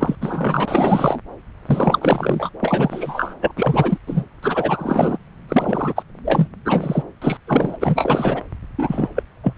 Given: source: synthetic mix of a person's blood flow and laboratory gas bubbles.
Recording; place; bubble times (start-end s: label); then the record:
Doppler ultrasound of blood flow; subclavian vein
0.00-0.17 s: bubbles
0.21-1.21 s: bubbles
1.66-2.49 s: bubbles
2.60-3.35 s: bubbles
3.41-3.52 s: bubbles
3.56-3.98 s: bubbles
4.07-4.25 s: bubbles
4.43-5.18 s: bubbles
5.49-5.94 s: bubbles
5.96-6.03 s: bubbles
6.25-6.48 s: bubbles
6.65-7.03 s: bubbles
7.22-7.37 s: bubbles
7.47-7.76 s: bubbles
7.81-8.41 s: bubbles
8.78-9.09 s: bubbles
9.15-9.22 s: bubbles
9.43-9.54 s: bubbles
From the record:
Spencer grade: 3 (all of the cardiac periods contain showers or single bubble signals, but not dominating or overriding the cardiac motion signals); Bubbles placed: anywhere in the cardiac cycle